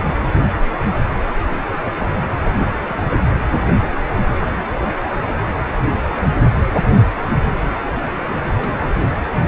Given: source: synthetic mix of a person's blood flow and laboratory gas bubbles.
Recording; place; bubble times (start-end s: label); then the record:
Doppler ultrasound of blood flow; precordium
2.75-3.03 s: bubbles
4.41-4.67 s: bubbles
4.73-4.88 s: bubbles
8.55-8.93 s: bubbles
From the record:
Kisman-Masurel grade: 211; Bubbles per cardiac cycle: several, 3 to 8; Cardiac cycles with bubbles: 1 to 10%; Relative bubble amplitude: barely perceptible (0.100 to 0.250); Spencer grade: 1 (occasional bubble signal discernible with the cardiac motion signal, with majority of cardiac periods free of bubbles); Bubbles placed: anywhere in the cardiac cycle